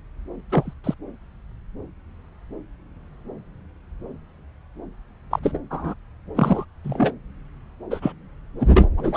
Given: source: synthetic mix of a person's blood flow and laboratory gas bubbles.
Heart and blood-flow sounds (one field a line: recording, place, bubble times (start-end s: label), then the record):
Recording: Doppler ultrasound of blood flow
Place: subclavian vein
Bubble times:
0.51-0.73 s: bubbles
0.83-0.94 s: bubbles
5.30-5.39 s: bubbles
5.43-5.58 s: bubbles
5.71-5.94 s: bubbles
6.35-6.65 s: bubbles
6.85-7.12 s: bubbles
7.90-8.12 s: bubbles
8.60-8.71 s: bubbles
8.74-8.89 s: bubbles
8.97-9.17 s: bubbles
From the record:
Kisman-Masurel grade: 232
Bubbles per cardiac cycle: several, 3 to 8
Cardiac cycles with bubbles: 50 to 99%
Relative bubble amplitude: moderate (0.250 to 0.450)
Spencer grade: 3 (all of the cardiac periods contain showers or single bubble signals, but not dominating or overriding the cardiac motion signals)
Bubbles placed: anywhere in the cardiac cycle